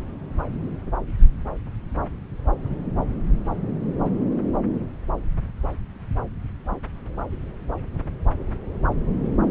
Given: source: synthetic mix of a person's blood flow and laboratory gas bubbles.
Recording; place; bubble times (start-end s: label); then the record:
Doppler ultrasound of blood flow; subclavian vein
no bubbles
From the record:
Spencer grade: 0 (complete lack of bubble signals)